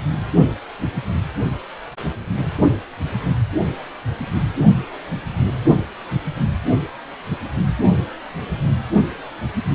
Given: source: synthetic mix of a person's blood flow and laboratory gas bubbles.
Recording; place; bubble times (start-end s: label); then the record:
Doppler ultrasound of blood flow; precordium
no bubbles
From the record:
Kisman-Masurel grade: 000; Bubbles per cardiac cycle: 0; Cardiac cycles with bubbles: 0%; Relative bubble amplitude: no bubbles discernible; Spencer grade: 0 (complete lack of bubble signals)